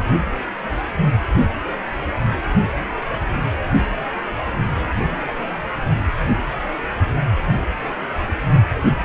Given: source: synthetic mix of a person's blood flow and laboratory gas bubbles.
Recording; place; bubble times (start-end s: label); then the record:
Doppler ultrasound of blood flow; precordium
5.04-5.50 s: bubbles
From the record:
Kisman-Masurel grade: 111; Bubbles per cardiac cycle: 1 to 2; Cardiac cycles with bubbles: 1 to 10%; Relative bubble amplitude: barely perceptible (0.100 to 0.250); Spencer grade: 1 (occasional bubble signal discernible with the cardiac motion signal, with majority of cardiac periods free of bubbles); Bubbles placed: anywhere in the cardiac cycle